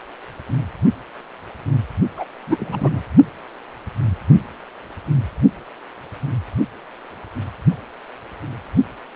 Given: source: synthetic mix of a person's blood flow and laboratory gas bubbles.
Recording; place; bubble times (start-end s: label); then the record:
Doppler ultrasound of blood flow; precordium
2.17-2.25 s: bubbles
2.46-3.03 s: bubbles
From the record:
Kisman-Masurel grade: 212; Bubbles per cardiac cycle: several, 3 to 8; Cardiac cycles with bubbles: 1 to 10%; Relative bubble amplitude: moderate (0.250 to 0.450); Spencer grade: 1 (occasional bubble signal discernible with the cardiac motion signal, with majority of cardiac periods free of bubbles); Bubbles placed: only in the low amplitude regions of the cardiac cycle